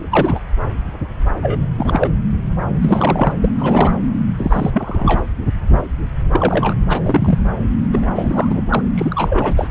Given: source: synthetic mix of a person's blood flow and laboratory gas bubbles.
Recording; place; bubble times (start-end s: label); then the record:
Doppler ultrasound of blood flow; subclavian vein
0.11-0.40 s: bubbles
1.43-1.59 s: bubbles
1.78-2.08 s: bubbles
2.81-3.33 s: bubbles
3.41-3.49 s: bubbles
3.58-3.93 s: bubbles
4.38-5.24 s: bubbles
6.33-6.75 s: bubbles
6.88-7.39 s: bubbles
7.93-8.07 s: bubbles
8.14-8.62 s: bubbles
8.69-8.82 s: bubbles
8.95-9.53 s: bubbles
9.56-9.68 s: bubbles
From the record:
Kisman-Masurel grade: 233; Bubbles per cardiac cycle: several, 3 to 8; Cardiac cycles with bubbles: 50 to 99%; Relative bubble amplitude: loud (0.450 to 0.775); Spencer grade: 3 (all of the cardiac periods contain showers or single bubble signals, but not dominating or overriding the cardiac motion signals); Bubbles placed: anywhere in the cardiac cycle